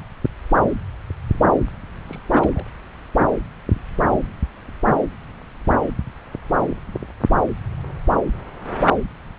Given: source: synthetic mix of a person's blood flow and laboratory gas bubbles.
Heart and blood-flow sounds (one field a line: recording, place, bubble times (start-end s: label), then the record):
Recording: Doppler ultrasound of blood flow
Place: subclavian vein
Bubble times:
2.07-2.21 s: bubbles
2.31-2.65 s: bubbles
From the record:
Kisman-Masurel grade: 221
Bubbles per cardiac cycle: several, 3 to 8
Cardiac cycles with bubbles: 10 to 50%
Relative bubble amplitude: barely perceptible (0.100 to 0.250)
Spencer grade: 2 (many but less than half of the cardiac periods contain bubble signals, singularly or in groups)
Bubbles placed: anywhere in the cardiac cycle